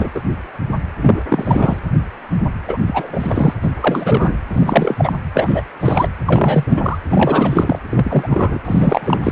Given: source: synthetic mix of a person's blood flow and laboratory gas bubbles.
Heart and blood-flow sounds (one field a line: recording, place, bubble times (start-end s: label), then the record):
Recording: Doppler ultrasound of blood flow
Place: precordium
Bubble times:
0.00-0.10 s: bubbles
0.15-0.21 s: bubbles
1.02-1.22 s: bubbles
1.29-1.81 s: bubbles
2.67-2.77 s: bubbles
2.86-3.54 s: bubbles
3.62-3.69 s: bubbles
3.80-4.35 s: bubbles
4.49-5.13 s: bubbles
5.34-5.62 s: bubbles
5.81-6.08 s: bubbles
6.27-6.99 s: bubbles
7.09-7.79 s: bubbles
7.89-8.59 s: bubbles
8.64-9.32 s: bubbles
From the record:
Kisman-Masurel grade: 333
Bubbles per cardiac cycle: rolling drumbeat, 9 or more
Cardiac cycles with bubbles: 50 to 99%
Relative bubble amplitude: loud (0.450 to 0.775)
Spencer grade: 3 (all of the cardiac periods contain showers or single bubble signals, but not dominating or overriding the cardiac motion signals)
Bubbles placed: anywhere in the cardiac cycle